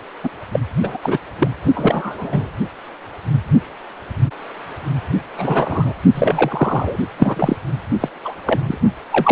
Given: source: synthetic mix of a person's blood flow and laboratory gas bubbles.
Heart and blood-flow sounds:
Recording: Doppler ultrasound of blood flow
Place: precordium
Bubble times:
0.24-0.29 s: bubbles
0.51-0.59 s: bubbles
0.83-0.97 s: bubbles
1.02-1.18 s: bubbles
1.39-1.48 s: bubbles
1.75-2.48 s: bubbles
5.37-5.95 s: bubbles
6.14-6.96 s: bubbles
7.17-7.56 s: bubbles
8.00-8.09 s: bubbles
8.24-8.34 s: bubbles
8.46-8.59 s: bubbles
8.63-8.78 s: bubbles
9.12-9.32 s: bubbles
From the record:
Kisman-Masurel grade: 233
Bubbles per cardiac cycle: several, 3 to 8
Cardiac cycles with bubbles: 50 to 99%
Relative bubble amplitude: loud (0.450 to 0.775)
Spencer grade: 3 (all of the cardiac periods contain showers or single bubble signals, but not dominating or overriding the cardiac motion signals)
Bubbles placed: only in the low amplitude regions of the cardiac cycle

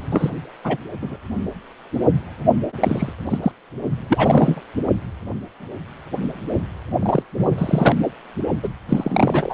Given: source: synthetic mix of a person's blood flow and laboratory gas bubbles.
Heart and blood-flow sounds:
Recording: Doppler ultrasound of blood flow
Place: precordium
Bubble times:
0.11-0.30 s: bubbles
0.64-0.77 s: bubbles
1.01-1.17 s: bubbles
2.80-3.12 s: bubbles
3.30-3.39 s: bubbles
3.42-3.52 s: bubbles
4.08-4.62 s: bubbles
7.02-7.23 s: bubbles
7.38-7.96 s: bubbles
8.62-8.68 s: bubbles
8.88-9.54 s: bubbles
From the record:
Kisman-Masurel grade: 232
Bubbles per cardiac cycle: several, 3 to 8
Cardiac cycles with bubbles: 50 to 99%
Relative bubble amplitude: moderate (0.250 to 0.450)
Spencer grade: 3 (all of the cardiac periods contain showers or single bubble signals, but not dominating or overriding the cardiac motion signals)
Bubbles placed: only in the low amplitude regions of the cardiac cycle

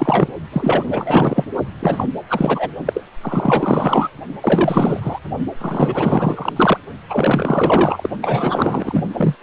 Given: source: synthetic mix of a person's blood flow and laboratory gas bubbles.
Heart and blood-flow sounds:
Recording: Doppler ultrasound of blood flow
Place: precordium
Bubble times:
0.00-0.33 s: bubbles
0.52-1.45 s: bubbles
1.79-2.06 s: bubbles
2.29-2.69 s: bubbles
2.86-3.02 s: bubbles
3.21-4.09 s: bubbles
4.42-5.20 s: bubbles
5.61-6.53 s: bubbles
6.56-6.78 s: bubbles
7.09-8.09 s: bubbles
8.21-9.04 s: bubbles
9.14-9.35 s: bubbles
From the record:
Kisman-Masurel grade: 444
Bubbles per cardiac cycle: continuous sound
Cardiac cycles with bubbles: 100%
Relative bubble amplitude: maximal (0.775 to 0.999)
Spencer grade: 4 (maximum detectable bubble signal sounding continuously throughout systole and diastole of every cardiac period, and overriding the amplitude of the normal cardiac signals)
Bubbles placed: only in the low amplitude regions of the cardiac cycle

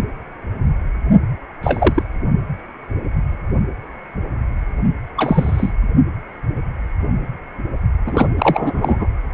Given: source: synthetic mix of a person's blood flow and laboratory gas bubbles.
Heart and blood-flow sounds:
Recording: Doppler ultrasound of blood flow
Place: precordium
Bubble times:
1.63-2.03 s: bubbles
5.17-5.72 s: bubbles
8.06-8.29 s: bubbles
8.38-9.07 s: bubbles
From the record:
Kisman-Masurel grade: 223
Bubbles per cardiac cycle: several, 3 to 8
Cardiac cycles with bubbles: 10 to 50%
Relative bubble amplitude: loud (0.450 to 0.775)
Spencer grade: 2 (many but less than half of the cardiac periods contain bubble signals, singularly or in groups)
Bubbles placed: only in the low amplitude regions of the cardiac cycle

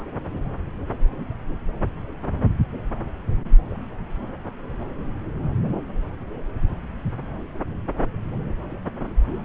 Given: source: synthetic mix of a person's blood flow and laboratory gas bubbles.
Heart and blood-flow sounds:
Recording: Doppler ultrasound of blood flow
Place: subclavian vein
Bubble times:
0.00-0.06 s: bubbles
From the record:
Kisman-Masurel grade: 111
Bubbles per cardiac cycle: 1 to 2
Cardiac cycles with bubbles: 1 to 10%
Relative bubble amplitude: barely perceptible (0.100 to 0.250)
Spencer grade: 1 (occasional bubble signal discernible with the cardiac motion signal, with majority of cardiac periods free of bubbles)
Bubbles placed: anywhere in the cardiac cycle

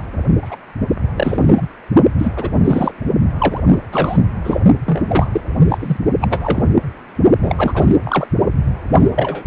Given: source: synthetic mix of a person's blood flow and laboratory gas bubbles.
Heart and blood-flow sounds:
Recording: Doppler ultrasound of blood flow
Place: precordium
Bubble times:
0.42-0.56 s: bubbles
1.15-1.69 s: bubbles
2.18-2.32 s: bubbles
2.36-2.49 s: bubbles
2.64-2.92 s: bubbles
3.38-3.60 s: bubbles
3.71-3.78 s: bubbles
3.92-4.18 s: bubbles
4.44-4.58 s: bubbles
4.85-5.41 s: bubbles
5.68-5.97 s: bubbles
6.21-6.63 s: bubbles
7.42-7.96 s: bubbles
8.04-8.28 s: bubbles
8.99-9.10 s: bubbles
9.16-9.45 s: bubbles
From the record:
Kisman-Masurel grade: 233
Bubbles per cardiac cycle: several, 3 to 8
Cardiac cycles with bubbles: 50 to 99%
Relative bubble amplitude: loud (0.450 to 0.775)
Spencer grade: 3 (all of the cardiac periods contain showers or single bubble signals, but not dominating or overriding the cardiac motion signals)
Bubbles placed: only in the low amplitude regions of the cardiac cycle

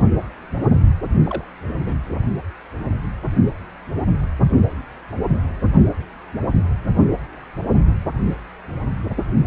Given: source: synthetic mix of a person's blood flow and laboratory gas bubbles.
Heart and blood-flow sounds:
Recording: Doppler ultrasound of blood flow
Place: precordium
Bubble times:
1.24-1.44 s: bubbles
1.77-2.00 s: bubbles
From the record:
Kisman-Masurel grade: 111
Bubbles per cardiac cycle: 1 to 2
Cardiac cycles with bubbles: 1 to 10%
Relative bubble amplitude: barely perceptible (0.100 to 0.250)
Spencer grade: 1 (occasional bubble signal discernible with the cardiac motion signal, with majority of cardiac periods free of bubbles)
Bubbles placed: anywhere in the cardiac cycle

